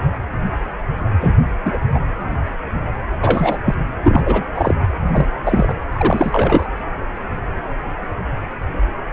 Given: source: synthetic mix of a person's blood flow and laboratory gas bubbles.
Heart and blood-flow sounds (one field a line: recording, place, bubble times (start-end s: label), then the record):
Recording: Doppler ultrasound of blood flow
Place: precordium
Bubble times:
1.20-1.34 s: bubbles
1.65-1.79 s: bubbles
1.94-2.00 s: bubbles
3.21-3.57 s: bubbles
3.65-3.74 s: bubbles
4.03-4.45 s: bubbles
4.54-4.74 s: bubbles
5.12-5.26 s: bubbles
5.45-5.75 s: bubbles
5.93-6.68 s: bubbles
From the record:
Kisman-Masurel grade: 233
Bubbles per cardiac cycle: several, 3 to 8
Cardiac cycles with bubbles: 50 to 99%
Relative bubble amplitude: loud (0.450 to 0.775)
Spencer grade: 3 (all of the cardiac periods contain showers or single bubble signals, but not dominating or overriding the cardiac motion signals)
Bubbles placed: anywhere in the cardiac cycle